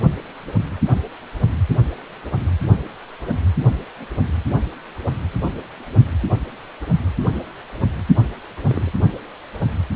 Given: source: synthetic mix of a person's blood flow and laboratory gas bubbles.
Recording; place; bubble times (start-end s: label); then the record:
Doppler ultrasound of blood flow; precordium
8.68-8.91 s: bubbles
From the record:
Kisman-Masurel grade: 111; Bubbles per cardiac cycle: 1 to 2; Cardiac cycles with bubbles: 1 to 10%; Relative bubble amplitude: barely perceptible (0.100 to 0.250); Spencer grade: 1 (occasional bubble signal discernible with the cardiac motion signal, with majority of cardiac periods free of bubbles); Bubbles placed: only in the low amplitude regions of the cardiac cycle